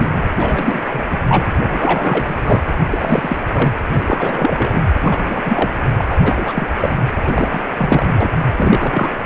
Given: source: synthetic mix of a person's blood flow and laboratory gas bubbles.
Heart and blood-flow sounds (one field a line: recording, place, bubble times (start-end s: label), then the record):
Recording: Doppler ultrasound of blood flow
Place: precordium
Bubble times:
0.00-0.23 s: bubbles
0.40-0.81 s: bubbles
0.89-1.06 s: bubbles
1.11-1.17 s: bubbles
1.29-1.46 s: bubbles
1.59-2.36 s: bubbles
2.44-2.60 s: bubbles
2.90-3.37 s: bubbles
3.53-3.73 s: bubbles
3.92-4.85 s: bubbles
5.01-5.42 s: bubbles
5.44-5.74 s: bubbles
5.97-6.04 s: bubbles
6.08-6.16 s: bubbles
6.23-6.67 s: bubbles
6.80-6.97 s: bubbles
7.24-8.29 s: bubbles
8.56-9.11 s: bubbles
From the record:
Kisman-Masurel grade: 343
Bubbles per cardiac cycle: rolling drumbeat, 9 or more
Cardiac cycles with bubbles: 100%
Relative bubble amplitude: loud (0.450 to 0.775)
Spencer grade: 3 (all of the cardiac periods contain showers or single bubble signals, but not dominating or overriding the cardiac motion signals)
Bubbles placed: anywhere in the cardiac cycle